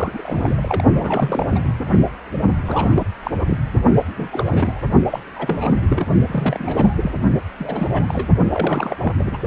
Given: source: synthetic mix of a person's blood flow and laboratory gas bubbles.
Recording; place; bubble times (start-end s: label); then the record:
Doppler ultrasound of blood flow; precordium
0.00-0.84 s: bubbles
0.96-1.60 s: bubbles
1.85-2.00 s: bubbles
2.65-2.92 s: bubbles
2.94-3.06 s: bubbles
3.23-3.31 s: bubbles
3.39-3.56 s: bubbles
4.17-4.28 s: bubbles
4.32-4.80 s: bubbles
5.11-5.20 s: bubbles
5.35-5.73 s: bubbles
5.88-6.05 s: bubbles
6.28-7.12 s: bubbles
7.58-8.29 s: bubbles
8.52-8.96 s: bubbles
9.01-9.13 s: bubbles
9.19-9.38 s: bubbles
From the record:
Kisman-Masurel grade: 342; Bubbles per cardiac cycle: rolling drumbeat, 9 or more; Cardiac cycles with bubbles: 100%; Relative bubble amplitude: moderate (0.250 to 0.450); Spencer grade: 3 (all of the cardiac periods contain showers or single bubble signals, but not dominating or overriding the cardiac motion signals); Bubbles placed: only in the low amplitude regions of the cardiac cycle